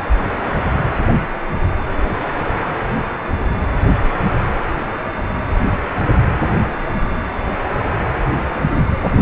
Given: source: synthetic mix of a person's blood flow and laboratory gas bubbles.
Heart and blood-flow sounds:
Doppler ultrasound of blood flow; precordium
no bubbles
From the record:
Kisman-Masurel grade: 000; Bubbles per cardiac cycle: 0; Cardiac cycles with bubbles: 0%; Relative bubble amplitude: no bubbles discernible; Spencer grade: 0 (complete lack of bubble signals)

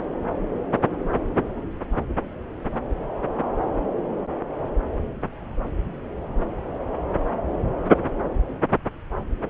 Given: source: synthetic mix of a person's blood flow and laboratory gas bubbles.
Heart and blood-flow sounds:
Doppler ultrasound of blood flow; subclavian vein
no bubbles
From the record:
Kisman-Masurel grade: 000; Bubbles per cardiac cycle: 0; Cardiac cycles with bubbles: 0%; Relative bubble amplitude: no bubbles discernible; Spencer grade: 0 (complete lack of bubble signals)

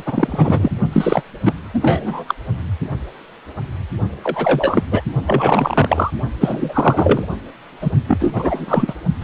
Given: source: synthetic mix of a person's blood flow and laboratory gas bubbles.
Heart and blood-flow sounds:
Doppler ultrasound of blood flow; precordium
0.00-0.71 s: bubbles
0.92-1.23 s: bubbles
1.45-1.54 s: bubbles
1.73-2.25 s: bubbles
2.27-2.35 s: bubbles
4.23-4.83 s: bubbles
4.91-5.01 s: bubbles
5.26-6.10 s: bubbles
6.40-7.28 s: bubbles
7.81-7.92 s: bubbles
8.06-8.95 s: bubbles
9.21-9.24 s: bubbles
From the record:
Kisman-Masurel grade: 333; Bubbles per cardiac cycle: rolling drumbeat, 9 or more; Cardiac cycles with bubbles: 50 to 99%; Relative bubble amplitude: loud (0.450 to 0.775); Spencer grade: 3 (all of the cardiac periods contain showers or single bubble signals, but not dominating or overriding the cardiac motion signals); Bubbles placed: only in the low amplitude regions of the cardiac cycle

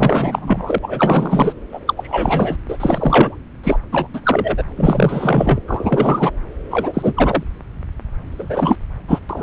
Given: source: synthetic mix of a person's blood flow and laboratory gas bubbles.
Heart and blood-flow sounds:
Doppler ultrasound of blood flow; subclavian vein
0.00-0.79 s: bubbles
0.82-1.54 s: bubbles
1.72-1.80 s: bubbles
1.87-2.56 s: bubbles
2.68-3.35 s: bubbles
3.63-3.79 s: bubbles
3.92-4.08 s: bubbles
4.13-4.63 s: bubbles
4.76-5.60 s: bubbles
5.67-6.31 s: bubbles
6.70-7.44 s: bubbles
8.31-8.79 s: bubbles
9.07-9.20 s: bubbles
9.29-9.43 s: bubbles
From the record:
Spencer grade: 3 (all of the cardiac periods contain showers or single bubble signals, but not dominating or overriding the cardiac motion signals); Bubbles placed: anywhere in the cardiac cycle

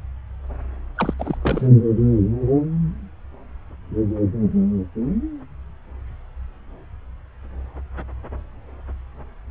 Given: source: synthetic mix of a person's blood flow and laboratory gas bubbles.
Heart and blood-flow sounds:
Doppler ultrasound of blood flow; subclavian vein
0.95-1.14 s: bubbles
1.19-1.38 s: bubbles
1.42-1.68 s: bubbles
From the record:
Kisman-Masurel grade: 212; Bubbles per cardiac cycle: several, 3 to 8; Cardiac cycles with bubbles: 1 to 10%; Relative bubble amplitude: moderate (0.250 to 0.450); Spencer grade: 1 (occasional bubble signal discernible with the cardiac motion signal, with majority of cardiac periods free of bubbles); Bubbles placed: anywhere in the cardiac cycle

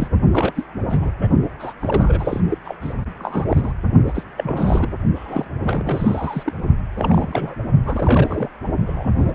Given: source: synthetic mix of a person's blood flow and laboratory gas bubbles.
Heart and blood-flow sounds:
Doppler ultrasound of blood flow; precordium
0.00-0.08 s: bubbles
0.31-0.65 s: bubbles
0.90-1.10 s: bubbles
1.20-1.29 s: bubbles
1.59-1.73 s: bubbles
1.81-2.40 s: bubbles
2.50-2.58 s: bubbles
2.65-2.76 s: bubbles
2.81-2.94 s: bubbles
3.18-3.45 s: bubbles
3.48-3.73 s: bubbles
4.07-4.25 s: bubbles
4.37-4.92 s: bubbles
5.15-5.52 s: bubbles
5.60-6.53 s: bubbles
6.96-7.55 s: bubbles
7.85-8.49 s: bubbles
8.86-9.12 s: bubbles
9.18-9.35 s: bubbles
From the record:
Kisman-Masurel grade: 342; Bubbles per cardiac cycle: rolling drumbeat, 9 or more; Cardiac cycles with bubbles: 100%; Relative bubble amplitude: moderate (0.250 to 0.450); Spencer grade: 3 (all of the cardiac periods contain showers or single bubble signals, but not dominating or overriding the cardiac motion signals); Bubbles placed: only in the low amplitude regions of the cardiac cycle

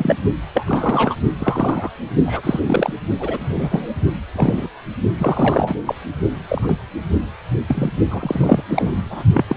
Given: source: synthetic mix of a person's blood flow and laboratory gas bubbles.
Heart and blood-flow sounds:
Doppler ultrasound of blood flow; precordium
0.00-0.16 s: bubbles
0.54-1.15 s: bubbles
1.39-1.91 s: bubbles
2.25-2.93 s: bubbles
3.19-3.96 s: bubbles
4.35-4.69 s: bubbles
5.18-5.75 s: bubbles
5.86-5.95 s: bubbles
6.48-6.75 s: bubbles
7.68-7.90 s: bubbles
8.10-8.63 s: bubbles
8.69-9.24 s: bubbles
9.33-9.46 s: bubbles
9.48-9.57 s: bubbles
From the record:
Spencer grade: 3 (all of the cardiac periods contain showers or single bubble signals, but not dominating or overriding the cardiac motion signals); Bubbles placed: only in the low amplitude regions of the cardiac cycle

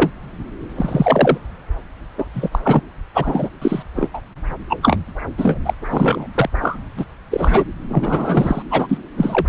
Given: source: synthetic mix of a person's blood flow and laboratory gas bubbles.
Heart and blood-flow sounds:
Doppler ultrasound of blood flow; subclavian vein
0.00-0.10 s: bubbles
0.77-1.38 s: bubbles
2.18-2.25 s: bubbles
2.33-2.59 s: bubbles
2.63-2.81 s: bubbles
3.14-3.49 s: bubbles
3.61-3.82 s: bubbles
3.95-4.09 s: bubbles
4.13-4.21 s: bubbles
4.70-4.78 s: bubbles
4.81-4.96 s: bubbles
5.38-5.58 s: bubbles
5.65-5.73 s: bubbles
5.90-6.27 s: bubbles
6.35-6.49 s: bubbles
6.62-6.78 s: bubbles
6.96-7.05 s: bubbles
7.30-7.64 s: bubbles
7.88-8.62 s: bubbles
8.70-8.97 s: bubbles
9.16-9.46 s: bubbles
From the record:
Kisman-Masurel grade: 233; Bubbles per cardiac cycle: several, 3 to 8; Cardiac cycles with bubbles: 50 to 99%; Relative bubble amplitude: loud (0.450 to 0.775); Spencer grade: 3 (all of the cardiac periods contain showers or single bubble signals, but not dominating or overriding the cardiac motion signals); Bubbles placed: anywhere in the cardiac cycle

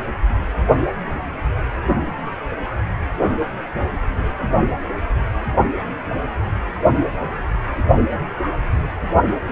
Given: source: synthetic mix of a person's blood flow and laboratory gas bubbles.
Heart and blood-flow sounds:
Doppler ultrasound of blood flow; precordium
9.47-9.52 s: bubbles
From the record:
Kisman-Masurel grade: 113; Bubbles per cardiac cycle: 1 to 2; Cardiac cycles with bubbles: 1 to 10%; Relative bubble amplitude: loud (0.450 to 0.775); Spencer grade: 1 (occasional bubble signal discernible with the cardiac motion signal, with majority of cardiac periods free of bubbles); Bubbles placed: only in the low amplitude regions of the cardiac cycle

